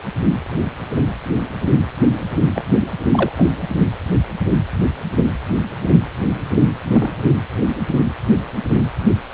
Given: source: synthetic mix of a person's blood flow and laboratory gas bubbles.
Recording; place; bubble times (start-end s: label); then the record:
Doppler ultrasound of blood flow; precordium
2.54-2.65 s: bubbles
3.11-3.32 s: bubbles
3.37-3.50 s: bubbles
6.84-7.09 s: bubbles
From the record:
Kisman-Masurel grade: 122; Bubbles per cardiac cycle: 1 to 2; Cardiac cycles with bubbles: 10 to 50%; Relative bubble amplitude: moderate (0.250 to 0.450); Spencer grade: 2 (many but less than half of the cardiac periods contain bubble signals, singularly or in groups); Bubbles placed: anywhere in the cardiac cycle